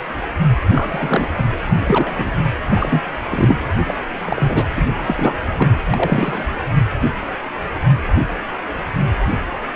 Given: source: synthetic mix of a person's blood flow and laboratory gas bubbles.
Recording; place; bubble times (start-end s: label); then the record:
Doppler ultrasound of blood flow; precordium
0.65-1.27 s: bubbles
1.38-1.44 s: bubbles
1.65-2.30 s: bubbles
2.69-3.00 s: bubbles
3.31-3.60 s: bubbles
3.87-3.94 s: bubbles
4.25-4.65 s: bubbles
4.76-4.88 s: bubbles
5.07-5.34 s: bubbles
5.58-5.79 s: bubbles
5.90-6.46 s: bubbles
From the record:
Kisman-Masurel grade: 233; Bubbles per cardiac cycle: several, 3 to 8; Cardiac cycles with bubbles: 50 to 99%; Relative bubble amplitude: loud (0.450 to 0.775); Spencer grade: 3 (all of the cardiac periods contain showers or single bubble signals, but not dominating or overriding the cardiac motion signals); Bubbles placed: anywhere in the cardiac cycle